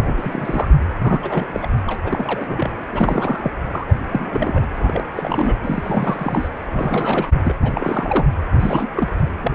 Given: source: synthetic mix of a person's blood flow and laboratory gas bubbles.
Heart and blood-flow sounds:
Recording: Doppler ultrasound of blood flow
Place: precordium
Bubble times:
0.00-0.73 s: bubbles
1.01-1.67 s: bubbles
1.87-2.71 s: bubbles
2.90-3.51 s: bubbles
3.71-3.95 s: bubbles
4.11-4.70 s: bubbles
4.75-5.07 s: bubbles
5.16-5.56 s: bubbles
5.63-6.48 s: bubbles
6.71-7.29 s: bubbles
7.43-7.56 s: bubbles
7.61-8.26 s: bubbles
8.60-8.87 s: bubbles
8.94-9.09 s: bubbles
9.40-9.55 s: bubbles
From the record:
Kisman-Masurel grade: 342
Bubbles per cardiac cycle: rolling drumbeat, 9 or more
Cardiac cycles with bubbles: 100%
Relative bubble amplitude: moderate (0.250 to 0.450)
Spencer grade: 3 (all of the cardiac periods contain showers or single bubble signals, but not dominating or overriding the cardiac motion signals)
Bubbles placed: anywhere in the cardiac cycle

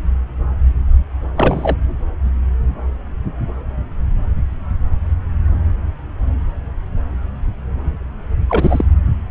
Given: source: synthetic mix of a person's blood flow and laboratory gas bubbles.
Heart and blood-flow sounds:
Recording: Doppler ultrasound of blood flow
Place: subclavian vein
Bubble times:
1.35-1.77 s: bubbles
8.48-8.85 s: bubbles
From the record:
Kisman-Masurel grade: 213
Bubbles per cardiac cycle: several, 3 to 8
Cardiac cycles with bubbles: 1 to 10%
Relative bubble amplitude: loud (0.450 to 0.775)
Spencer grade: 1 (occasional bubble signal discernible with the cardiac motion signal, with majority of cardiac periods free of bubbles)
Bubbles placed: anywhere in the cardiac cycle

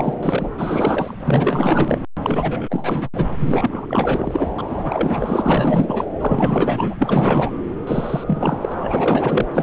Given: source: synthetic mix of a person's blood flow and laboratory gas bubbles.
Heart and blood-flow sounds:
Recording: Doppler ultrasound of blood flow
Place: subclavian vein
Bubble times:
0.00-0.48 s: bubbles
0.58-1.16 s: bubbles
1.24-1.98 s: bubbles
2.23-3.09 s: bubbles
3.13-3.27 s: bubbles
3.38-4.49 s: bubbles
4.58-6.04 s: bubbles
6.20-6.94 s: bubbles
6.99-7.53 s: bubbles
7.87-8.24 s: bubbles
8.27-9.45 s: bubbles
9.51-9.63 s: bubbles
From the record:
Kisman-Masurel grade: 444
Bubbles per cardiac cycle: continuous sound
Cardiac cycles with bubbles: 100%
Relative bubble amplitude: maximal (0.775 to 0.999)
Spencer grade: 4 (maximum detectable bubble signal sounding continuously throughout systole and diastole of every cardiac period, and overriding the amplitude of the normal cardiac signals)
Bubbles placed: anywhere in the cardiac cycle

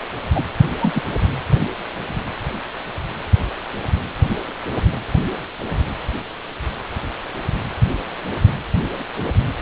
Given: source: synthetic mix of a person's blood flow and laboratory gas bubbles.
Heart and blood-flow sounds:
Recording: Doppler ultrasound of blood flow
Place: precordium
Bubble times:
0.35-0.43 s: bubbles
0.75-1.01 s: bubbles
From the record:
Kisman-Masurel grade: 212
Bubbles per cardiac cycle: several, 3 to 8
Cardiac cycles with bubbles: 1 to 10%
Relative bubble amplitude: moderate (0.250 to 0.450)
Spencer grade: 1 (occasional bubble signal discernible with the cardiac motion signal, with majority of cardiac periods free of bubbles)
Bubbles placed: anywhere in the cardiac cycle

